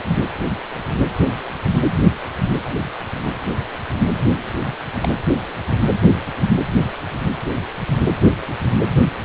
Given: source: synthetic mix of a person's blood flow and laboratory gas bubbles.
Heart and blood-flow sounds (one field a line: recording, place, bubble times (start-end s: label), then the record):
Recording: Doppler ultrasound of blood flow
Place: precordium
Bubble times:
5.02-5.09 s: bubbles
From the record:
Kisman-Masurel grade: 122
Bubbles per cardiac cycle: 1 to 2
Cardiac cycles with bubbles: 10 to 50%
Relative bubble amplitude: moderate (0.250 to 0.450)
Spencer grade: 2 (many but less than half of the cardiac periods contain bubble signals, singularly or in groups)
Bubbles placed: anywhere in the cardiac cycle